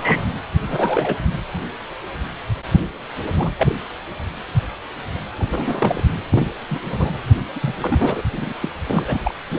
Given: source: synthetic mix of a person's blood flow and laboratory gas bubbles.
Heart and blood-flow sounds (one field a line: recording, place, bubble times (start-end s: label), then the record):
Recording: Doppler ultrasound of blood flow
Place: precordium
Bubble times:
0.00-0.25 s: bubbles
0.62-1.17 s: bubbles
3.36-3.79 s: bubbles
5.37-6.04 s: bubbles
6.30-6.52 s: bubbles
6.71-6.80 s: bubbles
6.92-7.10 s: bubbles
7.56-7.76 s: bubbles
7.81-8.22 s: bubbles
8.32-8.54 s: bubbles
8.62-8.69 s: bubbles
8.89-9.20 s: bubbles
9.25-9.35 s: bubbles
9.51-9.59 s: bubbles
From the record:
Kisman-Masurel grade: 232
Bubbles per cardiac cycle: several, 3 to 8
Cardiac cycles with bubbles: 50 to 99%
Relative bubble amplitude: moderate (0.250 to 0.450)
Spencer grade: 3 (all of the cardiac periods contain showers or single bubble signals, but not dominating or overriding the cardiac motion signals)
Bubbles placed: anywhere in the cardiac cycle